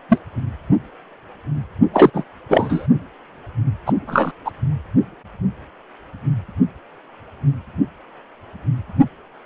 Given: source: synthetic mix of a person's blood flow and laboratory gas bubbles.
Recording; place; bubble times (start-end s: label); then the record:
Doppler ultrasound of blood flow; precordium
0.09-0.20 s: bubbles
1.93-2.10 s: bubbles
2.14-2.24 s: bubbles
2.48-2.87 s: bubbles
3.86-3.93 s: bubbles
4.07-4.31 s: bubbles
4.45-4.51 s: bubbles
From the record:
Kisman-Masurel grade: 233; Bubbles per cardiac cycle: several, 3 to 8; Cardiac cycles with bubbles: 50 to 99%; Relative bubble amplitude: loud (0.450 to 0.775); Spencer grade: 3 (all of the cardiac periods contain showers or single bubble signals, but not dominating or overriding the cardiac motion signals); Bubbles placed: only in the low amplitude regions of the cardiac cycle